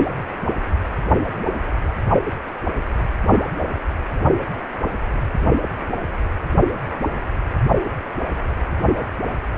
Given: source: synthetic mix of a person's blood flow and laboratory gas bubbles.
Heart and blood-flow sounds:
Doppler ultrasound of blood flow; precordium
no bubbles
From the record:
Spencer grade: 0 (complete lack of bubble signals)

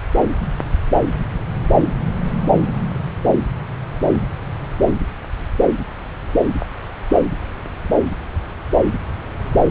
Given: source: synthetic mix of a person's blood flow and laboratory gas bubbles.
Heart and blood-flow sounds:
Doppler ultrasound of blood flow; subclavian vein
no bubbles
From the record:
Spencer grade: 0 (complete lack of bubble signals)

